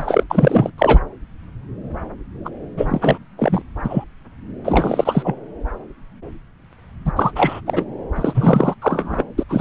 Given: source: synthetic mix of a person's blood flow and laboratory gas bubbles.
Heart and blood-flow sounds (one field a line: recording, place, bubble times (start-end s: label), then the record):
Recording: Doppler ultrasound of blood flow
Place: subclavian vein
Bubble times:
0.00-0.24 s: bubbles
0.30-0.71 s: bubbles
0.78-1.00 s: bubbles
2.44-2.49 s: bubbles
2.77-3.18 s: bubbles
3.38-3.61 s: bubbles
3.83-4.04 s: bubbles
4.64-5.35 s: bubbles
7.05-7.12 s: bubbles
7.16-7.32 s: bubbles
7.35-7.60 s: bubbles
7.66-7.86 s: bubbles
8.15-8.75 s: bubbles
8.81-9.23 s: bubbles
9.38-9.44 s: bubbles
9.49-9.61 s: bubbles
From the record:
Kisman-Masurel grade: 333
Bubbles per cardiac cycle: rolling drumbeat, 9 or more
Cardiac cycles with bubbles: 50 to 99%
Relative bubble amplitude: loud (0.450 to 0.775)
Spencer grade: 3 (all of the cardiac periods contain showers or single bubble signals, but not dominating or overriding the cardiac motion signals)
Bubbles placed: anywhere in the cardiac cycle